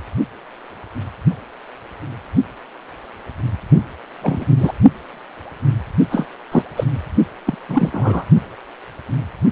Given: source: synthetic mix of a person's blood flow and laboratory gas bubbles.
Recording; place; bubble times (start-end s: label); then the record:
Doppler ultrasound of blood flow; precordium
4.21-4.46 s: bubbles
4.57-4.72 s: bubbles
6.10-6.26 s: bubbles
6.51-6.62 s: bubbles
6.76-6.84 s: bubbles
7.46-7.57 s: bubbles
7.68-7.89 s: bubbles
7.92-8.24 s: bubbles
From the record:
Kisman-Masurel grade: 233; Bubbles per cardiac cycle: several, 3 to 8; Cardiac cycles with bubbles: 50 to 99%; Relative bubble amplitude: loud (0.450 to 0.775); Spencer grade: 3 (all of the cardiac periods contain showers or single bubble signals, but not dominating or overriding the cardiac motion signals); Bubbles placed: only in the low amplitude regions of the cardiac cycle